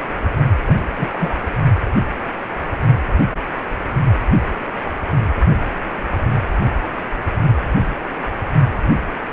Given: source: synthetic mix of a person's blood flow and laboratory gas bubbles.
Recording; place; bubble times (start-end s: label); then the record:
Doppler ultrasound of blood flow; precordium
0.67-0.75 s: bubbles
0.97-1.36 s: bubbles
From the record:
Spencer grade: 1 (occasional bubble signal discernible with the cardiac motion signal, with majority of cardiac periods free of bubbles); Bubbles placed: only in the low amplitude regions of the cardiac cycle